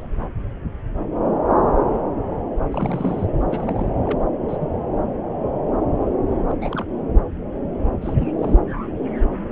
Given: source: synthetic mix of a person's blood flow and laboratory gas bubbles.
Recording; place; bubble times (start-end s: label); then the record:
Doppler ultrasound of blood flow; subclavian vein
0.00-0.10 s: bubbles
2.71-3.27 s: bubbles
3.49-3.92 s: bubbles
4.05-4.20 s: bubbles
4.48-4.57 s: bubbles
4.60-4.67 s: bubbles
6.49-6.58 s: bubbles
6.60-6.85 s: bubbles
8.01-8.15 s: bubbles
8.20-8.32 s: bubbles
8.38-8.56 s: bubbles
From the record:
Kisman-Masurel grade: 221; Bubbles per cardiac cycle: several, 3 to 8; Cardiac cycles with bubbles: 10 to 50%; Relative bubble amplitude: barely perceptible (0.100 to 0.250); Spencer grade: 2 (many but less than half of the cardiac periods contain bubble signals, singularly or in groups); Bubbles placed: anywhere in the cardiac cycle